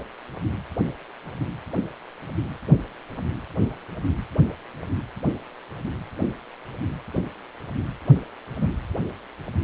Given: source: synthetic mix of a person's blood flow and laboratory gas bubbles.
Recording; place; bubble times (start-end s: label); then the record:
Doppler ultrasound of blood flow; precordium
8.60-8.67 s: bubbles
From the record:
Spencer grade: 1 (occasional bubble signal discernible with the cardiac motion signal, with majority of cardiac periods free of bubbles); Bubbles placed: anywhere in the cardiac cycle